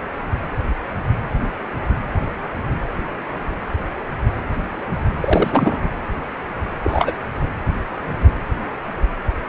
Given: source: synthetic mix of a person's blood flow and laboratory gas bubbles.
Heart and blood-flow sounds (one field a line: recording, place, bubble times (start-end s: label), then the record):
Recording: Doppler ultrasound of blood flow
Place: precordium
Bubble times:
5.21-5.77 s: bubbles
6.82-7.12 s: bubbles
From the record:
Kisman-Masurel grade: 222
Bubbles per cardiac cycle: several, 3 to 8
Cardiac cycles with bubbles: 10 to 50%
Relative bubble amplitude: moderate (0.250 to 0.450)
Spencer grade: 2 (many but less than half of the cardiac periods contain bubble signals, singularly or in groups)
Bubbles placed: anywhere in the cardiac cycle